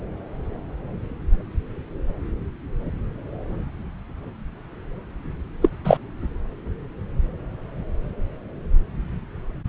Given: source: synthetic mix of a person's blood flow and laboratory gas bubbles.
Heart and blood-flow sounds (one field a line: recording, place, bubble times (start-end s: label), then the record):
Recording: Doppler ultrasound of blood flow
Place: subclavian vein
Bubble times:
5.62-5.69 s: bubbles
5.84-5.98 s: bubbles
From the record:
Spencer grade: 1 (occasional bubble signal discernible with the cardiac motion signal, with majority of cardiac periods free of bubbles)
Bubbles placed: anywhere in the cardiac cycle